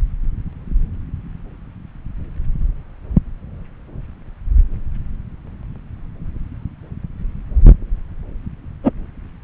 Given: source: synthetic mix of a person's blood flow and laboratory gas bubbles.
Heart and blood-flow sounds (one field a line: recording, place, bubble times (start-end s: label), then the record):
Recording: Doppler ultrasound of blood flow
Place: subclavian vein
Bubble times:
8.83-8.93 s: bubbles
From the record:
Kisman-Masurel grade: 113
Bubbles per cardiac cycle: 1 to 2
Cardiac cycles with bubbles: 1 to 10%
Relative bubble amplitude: loud (0.450 to 0.775)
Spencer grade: 1 (occasional bubble signal discernible with the cardiac motion signal, with majority of cardiac periods free of bubbles)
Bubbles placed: anywhere in the cardiac cycle